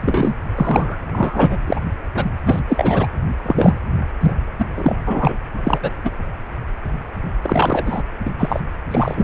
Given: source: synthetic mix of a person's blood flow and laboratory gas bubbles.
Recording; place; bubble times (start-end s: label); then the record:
Doppler ultrasound of blood flow; precordium
0.00-0.34 s: bubbles
0.55-0.98 s: bubbles
1.12-1.57 s: bubbles
1.66-1.80 s: bubbles
2.15-2.25 s: bubbles
2.46-2.60 s: bubbles
2.68-3.07 s: bubbles
3.44-3.77 s: bubbles
4.20-4.36 s: bubbles
4.58-4.66 s: bubbles
4.75-4.95 s: bubbles
5.07-5.37 s: bubbles
5.64-5.92 s: bubbles
6.04-6.11 s: bubbles
7.42-8.03 s: bubbles
8.25-8.30 s: bubbles
8.38-8.60 s: bubbles
8.90-9.24 s: bubbles
From the record:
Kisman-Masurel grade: 233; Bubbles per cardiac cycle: several, 3 to 8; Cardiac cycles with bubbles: 50 to 99%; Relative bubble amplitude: loud (0.450 to 0.775); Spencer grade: 3 (all of the cardiac periods contain showers or single bubble signals, but not dominating or overriding the cardiac motion signals); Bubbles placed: anywhere in the cardiac cycle